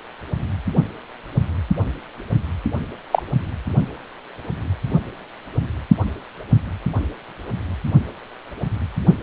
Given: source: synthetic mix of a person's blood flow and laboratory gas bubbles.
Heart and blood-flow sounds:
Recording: Doppler ultrasound of blood flow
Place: precordium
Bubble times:
3.12-3.23 s: bubbles
From the record:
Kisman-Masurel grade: 113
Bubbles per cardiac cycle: 1 to 2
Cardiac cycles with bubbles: 1 to 10%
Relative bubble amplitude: loud (0.450 to 0.775)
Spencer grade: 1 (occasional bubble signal discernible with the cardiac motion signal, with majority of cardiac periods free of bubbles)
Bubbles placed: only in the low amplitude regions of the cardiac cycle

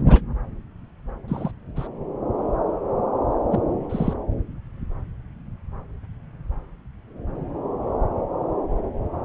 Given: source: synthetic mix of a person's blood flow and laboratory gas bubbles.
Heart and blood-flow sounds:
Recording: Doppler ultrasound of blood flow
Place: subclavian vein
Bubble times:
0.00-0.03 s: bubbles
0.08-0.22 s: bubbles
1.28-1.51 s: bubbles
1.76-1.87 s: bubbles
3.51-3.60 s: bubbles
3.89-4.13 s: bubbles
From the record:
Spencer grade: 2 (many but less than half of the cardiac periods contain bubble signals, singularly or in groups)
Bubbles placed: anywhere in the cardiac cycle

